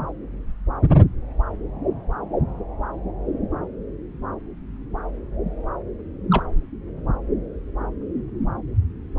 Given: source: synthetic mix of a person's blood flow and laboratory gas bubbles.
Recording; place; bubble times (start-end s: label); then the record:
Doppler ultrasound of blood flow; subclavian vein
6.31-6.44 s: bubbles
From the record:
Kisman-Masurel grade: 112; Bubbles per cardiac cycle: 1 to 2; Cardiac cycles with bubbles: 1 to 10%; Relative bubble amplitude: moderate (0.250 to 0.450); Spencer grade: 1 (occasional bubble signal discernible with the cardiac motion signal, with majority of cardiac periods free of bubbles); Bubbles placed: anywhere in the cardiac cycle